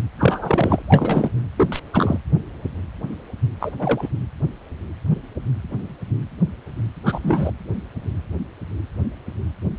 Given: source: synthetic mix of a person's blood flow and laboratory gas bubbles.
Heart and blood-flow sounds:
Doppler ultrasound of blood flow; precordium
0.18-0.82 s: bubbles
0.86-1.31 s: bubbles
1.57-1.68 s: bubbles
1.72-1.79 s: bubbles
1.93-2.17 s: bubbles
3.60-3.71 s: bubbles
3.78-4.09 s: bubbles
7.04-7.51 s: bubbles
From the record:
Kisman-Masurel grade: 223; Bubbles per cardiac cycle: several, 3 to 8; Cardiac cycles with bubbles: 10 to 50%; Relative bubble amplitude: loud (0.450 to 0.775); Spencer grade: 2 (many but less than half of the cardiac periods contain bubble signals, singularly or in groups); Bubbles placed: anywhere in the cardiac cycle

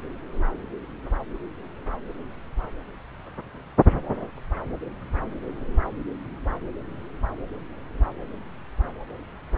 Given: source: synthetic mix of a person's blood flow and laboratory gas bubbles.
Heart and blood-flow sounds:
Doppler ultrasound of blood flow; subclavian vein
no bubbles
From the record:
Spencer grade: 0 (complete lack of bubble signals)

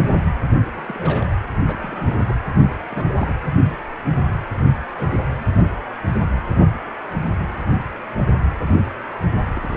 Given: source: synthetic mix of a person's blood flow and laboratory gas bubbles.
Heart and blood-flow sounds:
Doppler ultrasound of blood flow; precordium
0.76-0.82 s: bubbles
0.86-1.28 s: bubbles
1.62-2.38 s: bubbles
2.90-3.35 s: bubbles
4.54-4.72 s: bubbles
4.96-5.09 s: bubbles
5.21-5.41 s: bubbles
9.55-9.77 s: bubbles
From the record:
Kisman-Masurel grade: 221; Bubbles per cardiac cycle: several, 3 to 8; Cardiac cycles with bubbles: 10 to 50%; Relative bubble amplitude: barely perceptible (0.100 to 0.250); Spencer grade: 2 (many but less than half of the cardiac periods contain bubble signals, singularly or in groups); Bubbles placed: anywhere in the cardiac cycle

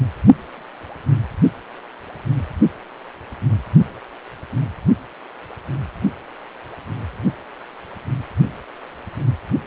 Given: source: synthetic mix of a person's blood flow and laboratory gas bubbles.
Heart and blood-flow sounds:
Doppler ultrasound of blood flow; precordium
0.00-0.03 s: bubbles
From the record:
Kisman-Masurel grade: 221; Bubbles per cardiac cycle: several, 3 to 8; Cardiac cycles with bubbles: 10 to 50%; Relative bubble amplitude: barely perceptible (0.100 to 0.250); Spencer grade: 2 (many but less than half of the cardiac periods contain bubble signals, singularly or in groups); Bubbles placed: only in the low amplitude regions of the cardiac cycle

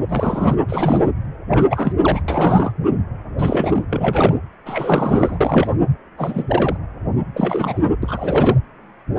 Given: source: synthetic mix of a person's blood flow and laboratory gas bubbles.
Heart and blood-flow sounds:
Doppler ultrasound of blood flow; precordium
0.09-0.56 s: bubbles
0.67-1.10 s: bubbles
1.50-1.93 s: bubbles
2.01-2.21 s: bubbles
2.28-2.72 s: bubbles
3.38-3.85 s: bubbles
3.90-4.35 s: bubbles
4.66-5.73 s: bubbles
6.18-6.77 s: bubbles
7.34-7.82 s: bubbles
8.02-8.58 s: bubbles
From the record:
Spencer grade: 3 (all of the cardiac periods contain showers or single bubble signals, but not dominating or overriding the cardiac motion signals); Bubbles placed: anywhere in the cardiac cycle

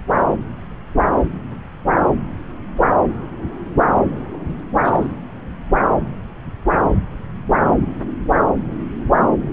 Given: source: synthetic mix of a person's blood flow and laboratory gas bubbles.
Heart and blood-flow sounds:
Doppler ultrasound of blood flow; subclavian vein
4.19-4.24 s: bubbles
4.33-4.39 s: bubbles
4.47-4.57 s: bubbles
4.84-5.08 s: bubbles
From the record:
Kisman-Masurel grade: 221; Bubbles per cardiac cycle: several, 3 to 8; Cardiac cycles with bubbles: 10 to 50%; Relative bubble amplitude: barely perceptible (0.100 to 0.250); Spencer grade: 2 (many but less than half of the cardiac periods contain bubble signals, singularly or in groups); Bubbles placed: anywhere in the cardiac cycle

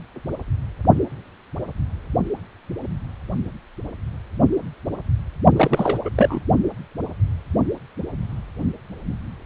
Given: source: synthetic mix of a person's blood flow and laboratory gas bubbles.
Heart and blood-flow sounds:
Doppler ultrasound of blood flow; precordium
5.56-5.98 s: bubbles
6.04-6.10 s: bubbles
6.15-6.42 s: bubbles
From the record:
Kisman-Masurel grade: 212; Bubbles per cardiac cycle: several, 3 to 8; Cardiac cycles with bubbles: 1 to 10%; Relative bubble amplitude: moderate (0.250 to 0.450); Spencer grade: 1 (occasional bubble signal discernible with the cardiac motion signal, with majority of cardiac periods free of bubbles); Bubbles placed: only in the low amplitude regions of the cardiac cycle

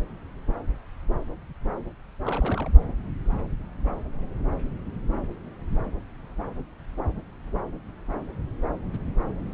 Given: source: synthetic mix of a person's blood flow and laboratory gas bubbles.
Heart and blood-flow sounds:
Doppler ultrasound of blood flow; subclavian vein
2.25-2.71 s: bubbles
From the record:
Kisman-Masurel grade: 211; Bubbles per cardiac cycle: several, 3 to 8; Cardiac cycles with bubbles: 1 to 10%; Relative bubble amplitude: barely perceptible (0.100 to 0.250); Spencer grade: 1 (occasional bubble signal discernible with the cardiac motion signal, with majority of cardiac periods free of bubbles); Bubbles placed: anywhere in the cardiac cycle

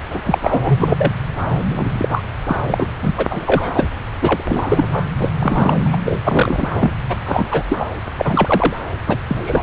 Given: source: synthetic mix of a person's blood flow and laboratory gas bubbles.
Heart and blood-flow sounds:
Doppler ultrasound of blood flow; subclavian vein
0.10-0.20 s: bubbles
0.23-0.38 s: bubbles
0.43-1.12 s: bubbles
1.69-2.21 s: bubbles
2.48-2.56 s: bubbles
2.67-2.87 s: bubbles
3.02-3.27 s: bubbles
3.30-3.89 s: bubbles
4.21-5.10 s: bubbles
5.18-5.32 s: bubbles
5.40-5.78 s: bubbles
5.84-5.97 s: bubbles
6.05-6.21 s: bubbles
6.24-6.68 s: bubbles
6.74-6.92 s: bubbles
7.08-7.16 s: bubbles
7.26-7.63 s: bubbles
7.68-7.86 s: bubbles
8.17-8.76 s: bubbles
9.06-9.19 s: bubbles
9.30-9.63 s: bubbles
From the record:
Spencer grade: 3 (all of the cardiac periods contain showers or single bubble signals, but not dominating or overriding the cardiac motion signals); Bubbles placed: anywhere in the cardiac cycle

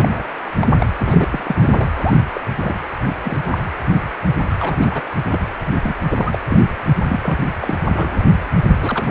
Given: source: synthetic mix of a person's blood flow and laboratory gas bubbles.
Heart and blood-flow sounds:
Doppler ultrasound of blood flow; precordium
0.00-0.09 s: bubbles
0.12-0.23 s: bubbles
0.44-0.70 s: bubbles
0.77-0.86 s: bubbles
0.99-1.28 s: bubbles
1.31-1.55 s: bubbles
1.59-1.87 s: bubbles
1.94-2.21 s: bubbles
2.34-2.41 s: bubbles
2.61-2.75 s: bubbles
3.08-3.13 s: bubbles
3.22-3.38 s: bubbles
3.45-3.58 s: bubbles
4.50-4.56 s: bubbles
4.59-4.78 s: bubbles
4.82-5.02 s: bubbles
5.31-5.40 s: bubbles
5.65-5.72 s: bubbles
5.83-5.97 s: bubbles
6.10-6.39 s: bubbles
6.48-6.61 s: bubbles
7.10-7.38 s: bubbles
7.60-7.75 s: bubbles
7.94-8.24 s: bubbles
8.67-8.76 s: bubbles
8.81-9.11 s: bubbles
From the record:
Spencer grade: 3 (all of the cardiac periods contain showers or single bubble signals, but not dominating or overriding the cardiac motion signals); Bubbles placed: anywhere in the cardiac cycle

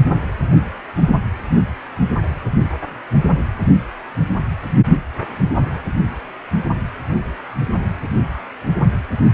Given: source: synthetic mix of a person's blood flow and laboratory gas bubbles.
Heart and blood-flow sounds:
Doppler ultrasound of blood flow; precordium
no bubbles
From the record:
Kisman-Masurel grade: 000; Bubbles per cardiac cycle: 0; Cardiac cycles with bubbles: 0%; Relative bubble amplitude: no bubbles discernible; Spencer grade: 0 (complete lack of bubble signals)

